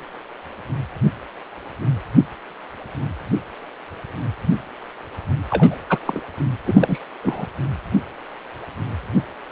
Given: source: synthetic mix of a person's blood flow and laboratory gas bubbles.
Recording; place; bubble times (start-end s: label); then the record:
Doppler ultrasound of blood flow; precordium
5.50-5.75 s: bubbles
5.89-5.99 s: bubbles
6.05-6.21 s: bubbles
6.66-7.00 s: bubbles
7.22-7.46 s: bubbles
From the record:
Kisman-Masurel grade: 222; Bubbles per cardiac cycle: several, 3 to 8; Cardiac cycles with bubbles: 10 to 50%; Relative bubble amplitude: moderate (0.250 to 0.450); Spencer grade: 2 (many but less than half of the cardiac periods contain bubble signals, singularly or in groups); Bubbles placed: anywhere in the cardiac cycle